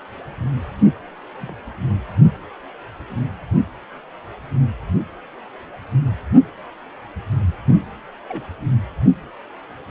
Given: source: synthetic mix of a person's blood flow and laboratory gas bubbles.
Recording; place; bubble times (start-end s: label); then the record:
Doppler ultrasound of blood flow; precordium
1.41-1.54 s: bubbles
8.28-8.42 s: bubbles
From the record:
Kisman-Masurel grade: 121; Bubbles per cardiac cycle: 1 to 2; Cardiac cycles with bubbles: 10 to 50%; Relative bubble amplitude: barely perceptible (0.100 to 0.250); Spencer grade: 2 (many but less than half of the cardiac periods contain bubble signals, singularly or in groups); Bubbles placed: anywhere in the cardiac cycle